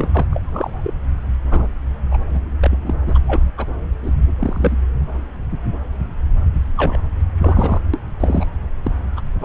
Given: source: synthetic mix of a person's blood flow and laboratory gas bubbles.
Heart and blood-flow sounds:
Doppler ultrasound of blood flow; subclavian vein
0.00-0.09 s: bubbles
0.12-0.28 s: bubbles
0.32-0.40 s: bubbles
0.43-0.93 s: bubbles
1.51-1.67 s: bubbles
2.10-2.17 s: bubbles
2.33-2.39 s: bubbles
2.64-2.95 s: bubbles
3.06-3.19 s: bubbles
3.27-3.44 s: bubbles
3.57-3.66 s: bubbles
4.02-4.11 s: bubbles
4.39-4.76 s: bubbles
6.77-7.00 s: bubbles
7.38-7.81 s: bubbles
7.93-7.99 s: bubbles
8.20-8.46 s: bubbles
8.83-8.92 s: bubbles
9.16-9.21 s: bubbles
9.40-9.45 s: bubbles
From the record:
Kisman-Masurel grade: 232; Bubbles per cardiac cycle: several, 3 to 8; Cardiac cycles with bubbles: 50 to 99%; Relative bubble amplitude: moderate (0.250 to 0.450); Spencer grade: 3 (all of the cardiac periods contain showers or single bubble signals, but not dominating or overriding the cardiac motion signals); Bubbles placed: anywhere in the cardiac cycle

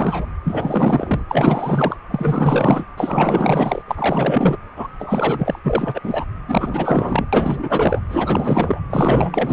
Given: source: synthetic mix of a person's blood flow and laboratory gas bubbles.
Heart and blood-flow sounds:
Doppler ultrasound of blood flow; precordium
0.00-0.26 s: bubbles
0.44-1.24 s: bubbles
1.29-1.96 s: bubbles
2.10-2.84 s: bubbles
2.97-3.82 s: bubbles
3.87-4.57 s: bubbles
4.76-4.88 s: bubbles
4.99-5.59 s: bubbles
5.64-6.25 s: bubbles
6.48-7.25 s: bubbles
7.33-8.00 s: bubbles
8.09-8.80 s: bubbles
8.89-9.53 s: bubbles
From the record:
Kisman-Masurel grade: 444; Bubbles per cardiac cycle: continuous sound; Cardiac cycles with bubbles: 100%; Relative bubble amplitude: maximal (0.775 to 0.999); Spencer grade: 4 (maximum detectable bubble signal sounding continuously throughout systole and diastole of every cardiac period, and overriding the amplitude of the normal cardiac signals); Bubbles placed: anywhere in the cardiac cycle

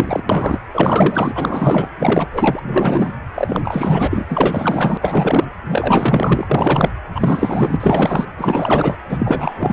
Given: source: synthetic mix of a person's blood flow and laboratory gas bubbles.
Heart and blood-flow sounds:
Doppler ultrasound of blood flow; precordium
0.00-0.23 s: bubbles
0.29-0.59 s: bubbles
0.74-1.32 s: bubbles
1.34-1.89 s: bubbles
1.99-2.29 s: bubbles
2.33-3.13 s: bubbles
3.35-4.26 s: bubbles
4.29-4.97 s: bubbles
5.01-5.44 s: bubbles
5.69-6.47 s: bubbles
6.49-6.90 s: bubbles
7.14-7.76 s: bubbles
7.80-8.25 s: bubbles
8.38-8.96 s: bubbles
9.09-9.72 s: bubbles
From the record:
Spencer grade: 4 (maximum detectable bubble signal sounding continuously throughout systole and diastole of every cardiac period, and overriding the amplitude of the normal cardiac signals); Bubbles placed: anywhere in the cardiac cycle

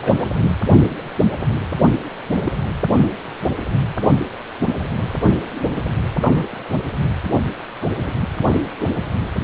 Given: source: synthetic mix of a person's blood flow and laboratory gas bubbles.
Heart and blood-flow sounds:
Doppler ultrasound of blood flow; precordium
0.00-0.25 s: bubbles
1.88-1.93 s: bubbles
2.39-2.56 s: bubbles
6.21-6.62 s: bubbles
7.81-7.96 s: bubbles
8.03-8.13 s: bubbles
From the record:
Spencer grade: 2 (many but less than half of the cardiac periods contain bubble signals, singularly or in groups); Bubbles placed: anywhere in the cardiac cycle

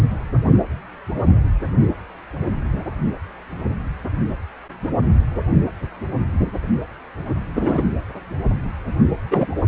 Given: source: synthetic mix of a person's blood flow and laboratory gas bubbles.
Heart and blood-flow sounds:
Doppler ultrasound of blood flow; precordium
7.55-7.83 s: bubbles
9.30-9.46 s: bubbles
From the record:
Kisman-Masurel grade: 113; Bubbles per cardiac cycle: 1 to 2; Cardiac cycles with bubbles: 1 to 10%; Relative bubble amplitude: loud (0.450 to 0.775); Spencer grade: 1 (occasional bubble signal discernible with the cardiac motion signal, with majority of cardiac periods free of bubbles); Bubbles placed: anywhere in the cardiac cycle

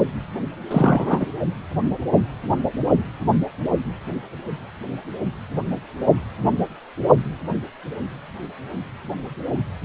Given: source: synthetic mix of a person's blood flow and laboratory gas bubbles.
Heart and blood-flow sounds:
Doppler ultrasound of blood flow; precordium
0.70-1.27 s: bubbles
From the record:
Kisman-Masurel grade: 213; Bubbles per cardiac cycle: several, 3 to 8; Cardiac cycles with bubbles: 1 to 10%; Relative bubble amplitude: loud (0.450 to 0.775); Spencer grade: 1 (occasional bubble signal discernible with the cardiac motion signal, with majority of cardiac periods free of bubbles); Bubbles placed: only in the low amplitude regions of the cardiac cycle

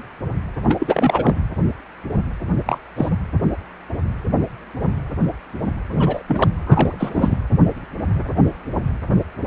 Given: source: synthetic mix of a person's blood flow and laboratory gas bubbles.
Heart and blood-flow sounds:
Doppler ultrasound of blood flow; precordium
0.68-1.44 s: bubbles
2.66-2.78 s: bubbles
2.96-3.17 s: bubbles
5.90-6.22 s: bubbles
6.28-6.49 s: bubbles
6.65-7.38 s: bubbles
From the record:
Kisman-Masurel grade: 222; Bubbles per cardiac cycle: several, 3 to 8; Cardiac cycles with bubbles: 10 to 50%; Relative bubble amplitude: moderate (0.250 to 0.450); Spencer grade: 2 (many but less than half of the cardiac periods contain bubble signals, singularly or in groups); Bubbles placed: anywhere in the cardiac cycle

